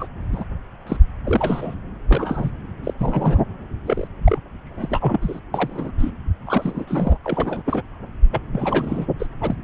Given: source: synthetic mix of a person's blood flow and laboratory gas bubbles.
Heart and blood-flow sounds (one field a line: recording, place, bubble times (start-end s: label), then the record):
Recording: Doppler ultrasound of blood flow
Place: subclavian vein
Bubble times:
0.00-0.08 s: bubbles
0.33-0.44 s: bubbles
0.86-0.97 s: bubbles
1.24-1.74 s: bubbles
2.08-2.50 s: bubbles
2.84-2.94 s: bubbles
2.99-3.42 s: bubbles
3.86-4.07 s: bubbles
4.24-4.38 s: bubbles
4.65-5.40 s: bubbles
5.54-5.91 s: bubbles
5.98-6.10 s: bubbles
6.46-6.84 s: bubbles
6.87-7.17 s: bubbles
7.24-7.62 s: bubbles
7.65-7.82 s: bubbles
8.31-8.41 s: bubbles
8.52-9.06 s: bubbles
9.19-9.27 s: bubbles
9.41-9.55 s: bubbles
From the record:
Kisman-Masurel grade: 342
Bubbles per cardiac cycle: rolling drumbeat, 9 or more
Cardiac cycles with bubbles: 100%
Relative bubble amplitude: moderate (0.250 to 0.450)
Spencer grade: 3 (all of the cardiac periods contain showers or single bubble signals, but not dominating or overriding the cardiac motion signals)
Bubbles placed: anywhere in the cardiac cycle